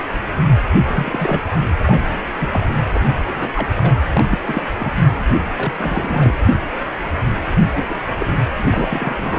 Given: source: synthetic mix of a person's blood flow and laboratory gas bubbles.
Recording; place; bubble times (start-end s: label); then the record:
Doppler ultrasound of blood flow; precordium
0.75-1.42 s: bubbles
1.85-2.19 s: bubbles
2.40-2.50 s: bubbles
2.52-2.60 s: bubbles
2.94-3.00 s: bubbles
3.27-3.68 s: bubbles
3.76-3.99 s: bubbles
4.14-4.23 s: bubbles
4.30-4.38 s: bubbles
4.46-4.63 s: bubbles
4.78-4.91 s: bubbles
5.56-5.74 s: bubbles
5.78-6.34 s: bubbles
7.58-7.68 s: bubbles
7.75-8.01 s: bubbles
8.18-8.32 s: bubbles
8.58-9.39 s: bubbles
From the record:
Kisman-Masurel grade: 232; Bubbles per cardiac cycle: several, 3 to 8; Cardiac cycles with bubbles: 50 to 99%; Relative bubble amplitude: moderate (0.250 to 0.450); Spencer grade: 3 (all of the cardiac periods contain showers or single bubble signals, but not dominating or overriding the cardiac motion signals); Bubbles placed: anywhere in the cardiac cycle